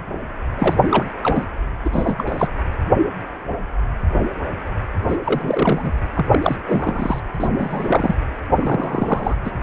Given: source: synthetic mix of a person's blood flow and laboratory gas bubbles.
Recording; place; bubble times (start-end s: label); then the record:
Doppler ultrasound of blood flow; precordium
0.58-0.77 s: bubbles
0.83-1.04 s: bubbles
1.22-1.45 s: bubbles
1.84-1.89 s: bubbles
1.92-2.48 s: bubbles
5.08-5.17 s: bubbles
5.24-5.92 s: bubbles
6.15-6.26 s: bubbles
6.30-6.40 s: bubbles
6.42-6.57 s: bubbles
6.66-7.20 s: bubbles
7.34-7.48 s: bubbles
7.58-8.14 s: bubbles
8.56-9.35 s: bubbles
9.44-9.51 s: bubbles
From the record:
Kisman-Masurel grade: 332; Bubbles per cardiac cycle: rolling drumbeat, 9 or more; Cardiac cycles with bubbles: 50 to 99%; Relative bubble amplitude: moderate (0.250 to 0.450); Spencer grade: 3 (all of the cardiac periods contain showers or single bubble signals, but not dominating or overriding the cardiac motion signals); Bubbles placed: anywhere in the cardiac cycle